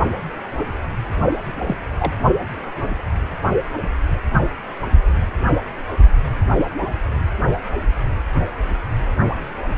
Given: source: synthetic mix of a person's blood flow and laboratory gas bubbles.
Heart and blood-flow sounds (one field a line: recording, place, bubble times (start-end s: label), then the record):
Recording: Doppler ultrasound of blood flow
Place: precordium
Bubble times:
1.44-1.78 s: bubbles
1.99-2.13 s: bubbles
From the record:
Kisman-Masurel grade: 112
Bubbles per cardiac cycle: 1 to 2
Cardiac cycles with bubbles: 1 to 10%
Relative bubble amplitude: moderate (0.250 to 0.450)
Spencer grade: 1 (occasional bubble signal discernible with the cardiac motion signal, with majority of cardiac periods free of bubbles)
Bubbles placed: only in the low amplitude regions of the cardiac cycle